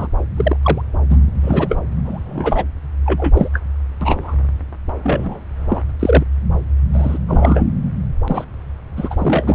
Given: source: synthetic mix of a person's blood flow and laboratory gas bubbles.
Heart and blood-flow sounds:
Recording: Doppler ultrasound of blood flow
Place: subclavian vein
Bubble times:
0.00-0.07 s: bubbles
0.36-0.57 s: bubbles
0.62-0.81 s: bubbles
1.09-1.17 s: bubbles
1.43-1.78 s: bubbles
2.04-2.65 s: bubbles
3.05-3.48 s: bubbles
3.53-3.61 s: bubbles
4.01-4.35 s: bubbles
5.03-5.40 s: bubbles
5.69-5.81 s: bubbles
5.89-5.92 s: bubbles
6.00-6.24 s: bubbles
6.93-7.18 s: bubbles
7.28-7.65 s: bubbles
8.27-8.44 s: bubbles
8.96-9.55 s: bubbles
From the record:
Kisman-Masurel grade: 243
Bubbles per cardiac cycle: several, 3 to 8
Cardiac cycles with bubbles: 100%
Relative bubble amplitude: loud (0.450 to 0.775)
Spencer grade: 3 (all of the cardiac periods contain showers or single bubble signals, but not dominating or overriding the cardiac motion signals)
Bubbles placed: anywhere in the cardiac cycle

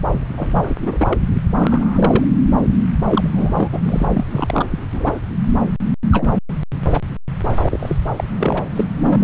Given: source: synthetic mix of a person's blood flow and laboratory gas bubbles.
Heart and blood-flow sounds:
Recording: Doppler ultrasound of blood flow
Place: subclavian vein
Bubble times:
0.37-0.76 s: bubbles
0.80-1.19 s: bubbles
1.45-2.25 s: bubbles
3.08-3.69 s: bubbles
3.72-3.79 s: bubbles
3.85-4.07 s: bubbles
4.14-4.25 s: bubbles
4.30-4.67 s: bubbles
4.70-4.79 s: bubbles
4.91-5.20 s: bubbles
6.12-6.31 s: bubbles
6.91-7.01 s: bubbles
7.61-7.98 s: bubbles
8.16-8.24 s: bubbles
8.38-8.66 s: bubbles
8.75-8.84 s: bubbles
9.06-9.24 s: bubbles
From the record:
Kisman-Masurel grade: 242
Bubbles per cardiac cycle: several, 3 to 8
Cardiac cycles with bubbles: 100%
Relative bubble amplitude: moderate (0.250 to 0.450)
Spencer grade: 3 (all of the cardiac periods contain showers or single bubble signals, but not dominating or overriding the cardiac motion signals)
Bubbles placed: anywhere in the cardiac cycle

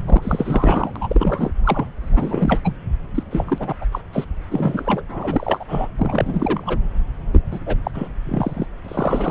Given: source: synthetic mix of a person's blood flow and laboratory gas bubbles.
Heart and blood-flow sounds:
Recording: Doppler ultrasound of blood flow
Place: subclavian vein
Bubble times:
0.06-0.92 s: bubbles
0.95-1.52 s: bubbles
1.64-1.87 s: bubbles
1.97-2.62 s: bubbles
2.64-2.76 s: bubbles
3.15-3.23 s: bubbles
3.31-3.75 s: bubbles
3.81-3.85 s: bubbles
3.92-4.01 s: bubbles
4.12-4.24 s: bubbles
4.50-5.03 s: bubbles
5.08-5.64 s: bubbles
5.68-5.88 s: bubbles
5.97-6.78 s: bubbles
7.32-7.40 s: bubbles
7.51-7.59 s: bubbles
7.66-7.76 s: bubbles
7.84-7.91 s: bubbles
7.94-8.08 s: bubbles
8.26-8.66 s: bubbles
8.84-9.31 s: bubbles
From the record:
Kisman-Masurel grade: 342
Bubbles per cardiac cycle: rolling drumbeat, 9 or more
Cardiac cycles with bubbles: 100%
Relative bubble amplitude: moderate (0.250 to 0.450)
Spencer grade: 3 (all of the cardiac periods contain showers or single bubble signals, but not dominating or overriding the cardiac motion signals)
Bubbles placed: anywhere in the cardiac cycle

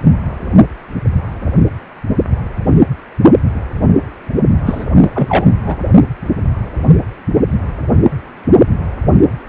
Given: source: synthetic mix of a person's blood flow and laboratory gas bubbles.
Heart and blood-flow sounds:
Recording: Doppler ultrasound of blood flow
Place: precordium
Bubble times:
4.65-4.85 s: bubbles
5.00-5.10 s: bubbles
5.14-5.46 s: bubbles
5.65-5.76 s: bubbles
From the record:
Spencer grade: 1 (occasional bubble signal discernible with the cardiac motion signal, with majority of cardiac periods free of bubbles)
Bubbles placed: only in the low amplitude regions of the cardiac cycle

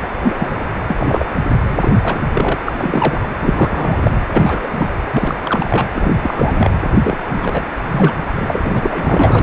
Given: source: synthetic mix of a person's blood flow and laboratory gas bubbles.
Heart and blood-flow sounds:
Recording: Doppler ultrasound of blood flow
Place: precordium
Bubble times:
0.00-0.08 s: bubbles
0.23-0.63 s: bubbles
0.88-0.95 s: bubbles
0.99-1.24 s: bubbles
1.67-2.20 s: bubbles
2.33-2.55 s: bubbles
2.65-2.73 s: bubbles
2.76-3.27 s: bubbles
3.40-4.20 s: bubbles
4.33-4.59 s: bubbles
4.63-4.68 s: bubbles
4.77-4.92 s: bubbles
5.12-5.38 s: bubbles
5.43-5.88 s: bubbles
5.94-6.71 s: bubbles
7.03-7.17 s: bubbles
7.34-7.64 s: bubbles
7.87-8.14 s: bubbles
8.35-8.60 s: bubbles
8.63-9.43 s: bubbles
From the record:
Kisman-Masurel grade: 342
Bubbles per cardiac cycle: rolling drumbeat, 9 or more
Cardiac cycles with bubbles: 100%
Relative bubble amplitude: moderate (0.250 to 0.450)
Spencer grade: 3 (all of the cardiac periods contain showers or single bubble signals, but not dominating or overriding the cardiac motion signals)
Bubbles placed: anywhere in the cardiac cycle

